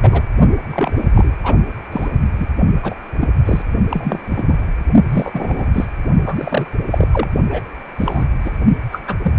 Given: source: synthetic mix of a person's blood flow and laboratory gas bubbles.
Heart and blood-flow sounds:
Doppler ultrasound of blood flow; precordium
0.02-0.22 s: bubbles
0.70-0.93 s: bubbles
0.96-1.09 s: bubbles
1.15-1.36 s: bubbles
1.44-1.55 s: bubbles
1.92-2.08 s: bubbles
2.39-2.48 s: bubbles
2.83-2.94 s: bubbles
3.19-3.28 s: bubbles
3.46-3.62 s: bubbles
3.90-4.67 s: bubbles
5.08-5.86 s: bubbles
6.26-6.66 s: bubbles
6.90-7.08 s: bubbles
7.12-7.28 s: bubbles
7.50-7.66 s: bubbles
7.98-8.27 s: bubbles
8.44-8.53 s: bubbles
8.91-9.02 s: bubbles
9.07-9.16 s: bubbles
9.23-9.32 s: bubbles
From the record:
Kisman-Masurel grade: 243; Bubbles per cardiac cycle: several, 3 to 8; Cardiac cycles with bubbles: 100%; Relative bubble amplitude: loud (0.450 to 0.775); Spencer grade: 3 (all of the cardiac periods contain showers or single bubble signals, but not dominating or overriding the cardiac motion signals); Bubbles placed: only in the low amplitude regions of the cardiac cycle

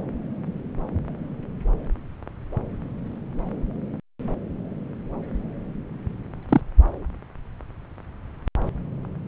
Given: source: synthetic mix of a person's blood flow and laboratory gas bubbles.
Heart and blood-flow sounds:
Doppler ultrasound of blood flow; subclavian vein
6.49-6.61 s: bubbles
From the record:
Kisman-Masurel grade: 112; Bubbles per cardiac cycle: 1 to 2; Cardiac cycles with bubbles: 1 to 10%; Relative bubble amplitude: moderate (0.250 to 0.450); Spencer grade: 1 (occasional bubble signal discernible with the cardiac motion signal, with majority of cardiac periods free of bubbles); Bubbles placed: anywhere in the cardiac cycle

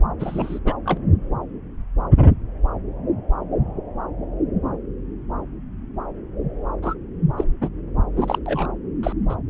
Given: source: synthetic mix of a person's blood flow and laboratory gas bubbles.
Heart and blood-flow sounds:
Doppler ultrasound of blood flow; subclavian vein
0.19-0.59 s: bubbles
0.65-0.73 s: bubbles
0.85-1.00 s: bubbles
6.82-6.95 s: bubbles
7.37-7.44 s: bubbles
7.61-7.69 s: bubbles
8.15-8.38 s: bubbles
8.46-8.67 s: bubbles
9.03-9.12 s: bubbles
9.29-9.35 s: bubbles
From the record:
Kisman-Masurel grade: 222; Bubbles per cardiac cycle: several, 3 to 8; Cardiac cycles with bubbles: 10 to 50%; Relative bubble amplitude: moderate (0.250 to 0.450); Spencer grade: 2 (many but less than half of the cardiac periods contain bubble signals, singularly or in groups); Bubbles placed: anywhere in the cardiac cycle

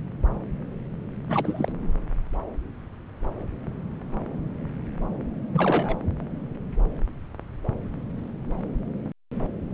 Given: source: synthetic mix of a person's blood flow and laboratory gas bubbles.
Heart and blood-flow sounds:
Doppler ultrasound of blood flow; subclavian vein
1.29-1.72 s: bubbles
5.54-5.96 s: bubbles
From the record:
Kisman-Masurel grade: 221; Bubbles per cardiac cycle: several, 3 to 8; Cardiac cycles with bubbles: 10 to 50%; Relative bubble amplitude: barely perceptible (0.100 to 0.250); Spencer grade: 2 (many but less than half of the cardiac periods contain bubble signals, singularly or in groups); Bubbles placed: anywhere in the cardiac cycle

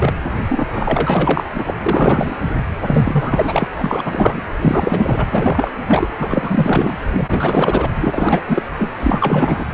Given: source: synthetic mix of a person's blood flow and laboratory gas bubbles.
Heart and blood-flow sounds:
Doppler ultrasound of blood flow; precordium
0.00-0.14 s: bubbles
0.48-0.67 s: bubbles
0.73-1.44 s: bubbles
1.54-1.74 s: bubbles
1.85-2.36 s: bubbles
2.86-3.69 s: bubbles
3.77-4.42 s: bubbles
4.61-5.26 s: bubbles
5.30-5.73 s: bubbles
5.86-6.08 s: bubbles
6.19-6.98 s: bubbles
7.04-7.90 s: bubbles
8.00-8.41 s: bubbles
8.45-8.62 s: bubbles
8.78-8.92 s: bubbles
9.00-9.64 s: bubbles
From the record:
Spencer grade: 4 (maximum detectable bubble signal sounding continuously throughout systole and diastole of every cardiac period, and overriding the amplitude of the normal cardiac signals); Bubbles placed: anywhere in the cardiac cycle

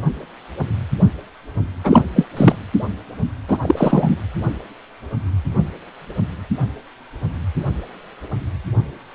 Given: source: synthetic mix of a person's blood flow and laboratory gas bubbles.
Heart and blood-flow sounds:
Doppler ultrasound of blood flow; precordium
1.83-2.02 s: bubbles
2.16-2.26 s: bubbles
2.37-2.56 s: bubbles
3.48-3.58 s: bubbles
3.61-4.17 s: bubbles
From the record:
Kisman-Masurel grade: 223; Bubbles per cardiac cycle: several, 3 to 8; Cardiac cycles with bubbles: 10 to 50%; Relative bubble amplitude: loud (0.450 to 0.775); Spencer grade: 2 (many but less than half of the cardiac periods contain bubble signals, singularly or in groups); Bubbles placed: anywhere in the cardiac cycle

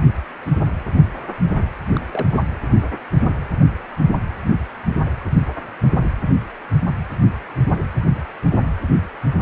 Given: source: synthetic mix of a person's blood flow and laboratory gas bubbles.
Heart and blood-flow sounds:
Doppler ultrasound of blood flow; precordium
1.96-1.99 s: bubbles
2.11-2.40 s: bubbles
From the record:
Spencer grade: 1 (occasional bubble signal discernible with the cardiac motion signal, with majority of cardiac periods free of bubbles); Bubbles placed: anywhere in the cardiac cycle

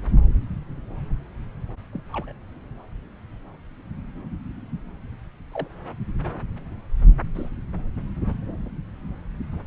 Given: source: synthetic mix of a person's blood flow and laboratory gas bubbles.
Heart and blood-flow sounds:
Doppler ultrasound of blood flow; subclavian vein
1.92-2.02 s: bubbles
2.13-2.32 s: bubbles
5.52-5.68 s: bubbles
7.35-7.49 s: bubbles
9.52-9.61 s: bubbles
From the record:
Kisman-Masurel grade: 121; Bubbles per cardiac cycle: 1 to 2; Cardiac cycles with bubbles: 10 to 50%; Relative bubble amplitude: barely perceptible (0.100 to 0.250); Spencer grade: 2 (many but less than half of the cardiac periods contain bubble signals, singularly or in groups); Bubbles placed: anywhere in the cardiac cycle

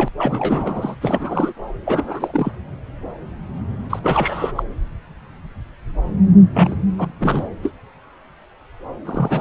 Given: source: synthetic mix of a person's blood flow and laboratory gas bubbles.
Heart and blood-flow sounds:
Doppler ultrasound of blood flow; subclavian vein
0.00-0.09 s: bubbles
0.18-0.96 s: bubbles
1.01-1.52 s: bubbles
1.85-2.52 s: bubbles
3.89-4.00 s: bubbles
4.03-4.63 s: bubbles
6.54-6.75 s: bubbles
6.97-7.08 s: bubbles
7.20-7.44 s: bubbles
7.62-7.71 s: bubbles
9.05-9.41 s: bubbles
From the record:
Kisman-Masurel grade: 332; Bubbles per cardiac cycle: rolling drumbeat, 9 or more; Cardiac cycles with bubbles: 50 to 99%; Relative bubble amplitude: moderate (0.250 to 0.450); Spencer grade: 3 (all of the cardiac periods contain showers or single bubble signals, but not dominating or overriding the cardiac motion signals); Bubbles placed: anywhere in the cardiac cycle

